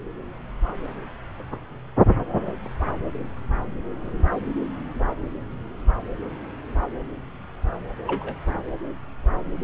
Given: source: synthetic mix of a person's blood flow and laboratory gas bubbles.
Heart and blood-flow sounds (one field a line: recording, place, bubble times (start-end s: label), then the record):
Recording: Doppler ultrasound of blood flow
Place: subclavian vein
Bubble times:
8.06-8.35 s: bubbles
From the record:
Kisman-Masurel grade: 112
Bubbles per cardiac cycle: 1 to 2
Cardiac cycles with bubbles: 1 to 10%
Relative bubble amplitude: moderate (0.250 to 0.450)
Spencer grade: 1 (occasional bubble signal discernible with the cardiac motion signal, with majority of cardiac periods free of bubbles)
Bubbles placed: anywhere in the cardiac cycle